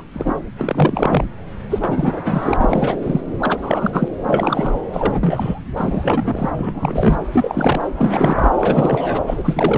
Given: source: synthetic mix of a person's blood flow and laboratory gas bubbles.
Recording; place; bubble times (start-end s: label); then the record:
Doppler ultrasound of blood flow; subclavian vein
0.00-0.02 s: bubbles
0.14-0.36 s: bubbles
0.58-1.25 s: bubbles
1.70-2.97 s: bubbles
3.02-3.21 s: bubbles
3.40-3.58 s: bubbles
3.62-4.08 s: bubbles
4.23-4.80 s: bubbles
4.92-5.60 s: bubbles
5.75-6.50 s: bubbles
6.57-7.18 s: bubbles
7.32-7.81 s: bubbles
7.96-8.50 s: bubbles
8.58-9.34 s: bubbles
9.37-9.78 s: bubbles
From the record:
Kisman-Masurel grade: 343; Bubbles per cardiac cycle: rolling drumbeat, 9 or more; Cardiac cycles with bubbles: 100%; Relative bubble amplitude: loud (0.450 to 0.775); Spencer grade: 3 (all of the cardiac periods contain showers or single bubble signals, but not dominating or overriding the cardiac motion signals); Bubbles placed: anywhere in the cardiac cycle